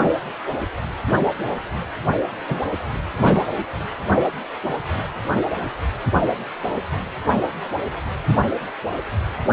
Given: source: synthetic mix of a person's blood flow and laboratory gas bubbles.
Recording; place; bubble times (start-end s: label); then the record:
Doppler ultrasound of blood flow; precordium
2.49-2.62 s: bubbles
3.23-3.42 s: bubbles
From the record:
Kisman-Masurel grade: 113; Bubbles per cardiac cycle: 1 to 2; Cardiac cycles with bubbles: 1 to 10%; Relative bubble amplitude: loud (0.450 to 0.775); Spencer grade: 1 (occasional bubble signal discernible with the cardiac motion signal, with majority of cardiac periods free of bubbles); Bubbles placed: anywhere in the cardiac cycle